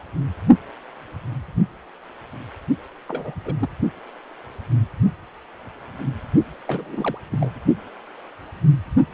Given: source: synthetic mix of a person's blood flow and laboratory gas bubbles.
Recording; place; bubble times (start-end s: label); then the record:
Doppler ultrasound of blood flow; precordium
3.08-3.32 s: bubbles
3.45-3.53 s: bubbles
3.60-3.68 s: bubbles
6.68-7.18 s: bubbles
7.31-7.50 s: bubbles
From the record:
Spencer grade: 2 (many but less than half of the cardiac periods contain bubble signals, singularly or in groups); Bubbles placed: only in the low amplitude regions of the cardiac cycle